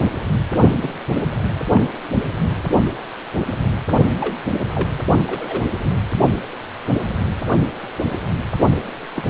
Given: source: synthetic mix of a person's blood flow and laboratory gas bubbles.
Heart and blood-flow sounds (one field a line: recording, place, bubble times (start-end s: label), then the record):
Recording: Doppler ultrasound of blood flow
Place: precordium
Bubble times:
0.82-0.94 s: bubbles
1.73-1.83 s: bubbles
4.20-4.34 s: bubbles
4.75-4.89 s: bubbles
5.26-5.62 s: bubbles
5.83-5.89 s: bubbles
9.15-9.23 s: bubbles
From the record:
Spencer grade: 2 (many but less than half of the cardiac periods contain bubble signals, singularly or in groups)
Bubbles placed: only in the low amplitude regions of the cardiac cycle